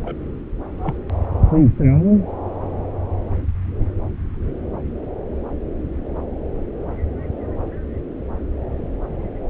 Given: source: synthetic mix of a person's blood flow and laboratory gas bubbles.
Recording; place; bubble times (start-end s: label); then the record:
Doppler ultrasound of blood flow; subclavian vein
0.00-0.15 s: bubbles
0.83-0.94 s: bubbles
From the record:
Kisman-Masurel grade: 212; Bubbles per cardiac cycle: several, 3 to 8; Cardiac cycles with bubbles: 1 to 10%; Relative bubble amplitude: moderate (0.250 to 0.450); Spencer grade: 1 (occasional bubble signal discernible with the cardiac motion signal, with majority of cardiac periods free of bubbles); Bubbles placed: anywhere in the cardiac cycle